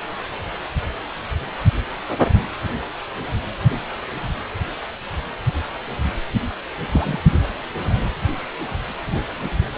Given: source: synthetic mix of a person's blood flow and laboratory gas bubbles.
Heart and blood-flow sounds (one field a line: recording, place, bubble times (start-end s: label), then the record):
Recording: Doppler ultrasound of blood flow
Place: precordium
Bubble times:
6.90-7.20 s: bubbles
From the record:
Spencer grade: 1 (occasional bubble signal discernible with the cardiac motion signal, with majority of cardiac periods free of bubbles)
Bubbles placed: anywhere in the cardiac cycle